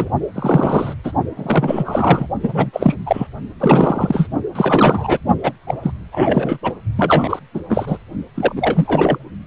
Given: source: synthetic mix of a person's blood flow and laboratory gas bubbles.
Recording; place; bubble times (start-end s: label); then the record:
Doppler ultrasound of blood flow; precordium
0.00-0.09 s: bubbles
0.35-0.94 s: bubbles
1.03-1.11 s: bubbles
1.36-2.27 s: bubbles
2.43-2.70 s: bubbles
2.73-2.95 s: bubbles
3.06-3.27 s: bubbles
3.59-4.28 s: bubbles
4.55-5.18 s: bubbles
5.43-5.53 s: bubbles
5.67-5.75 s: bubbles
5.83-5.92 s: bubbles
6.12-6.58 s: bubbles
6.62-6.72 s: bubbles
6.96-7.39 s: bubbles
7.54-7.60 s: bubbles
7.69-7.98 s: bubbles
8.36-8.54 s: bubbles
8.56-9.18 s: bubbles
From the record:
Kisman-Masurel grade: 343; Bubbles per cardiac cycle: rolling drumbeat, 9 or more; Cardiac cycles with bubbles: 100%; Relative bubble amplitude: loud (0.450 to 0.775); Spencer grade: 3 (all of the cardiac periods contain showers or single bubble signals, but not dominating or overriding the cardiac motion signals); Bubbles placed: only in the low amplitude regions of the cardiac cycle